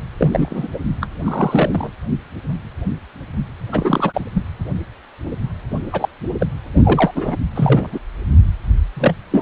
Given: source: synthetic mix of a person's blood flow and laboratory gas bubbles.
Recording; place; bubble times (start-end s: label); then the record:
Doppler ultrasound of blood flow; precordium
0.18-0.68 s: bubbles
0.74-0.78 s: bubbles
1.01-1.06 s: bubbles
1.25-1.90 s: bubbles
3.72-4.26 s: bubbles
4.34-4.42 s: bubbles
5.92-6.08 s: bubbles
6.40-6.46 s: bubbles
6.75-7.12 s: bubbles
7.15-7.35 s: bubbles
7.54-7.87 s: bubbles
7.92-7.99 s: bubbles
8.95-9.15 s: bubbles
9.30-9.42 s: bubbles
From the record:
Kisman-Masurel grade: 232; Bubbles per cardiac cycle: several, 3 to 8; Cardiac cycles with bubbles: 50 to 99%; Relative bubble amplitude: moderate (0.250 to 0.450); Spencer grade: 3 (all of the cardiac periods contain showers or single bubble signals, but not dominating or overriding the cardiac motion signals); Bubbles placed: anywhere in the cardiac cycle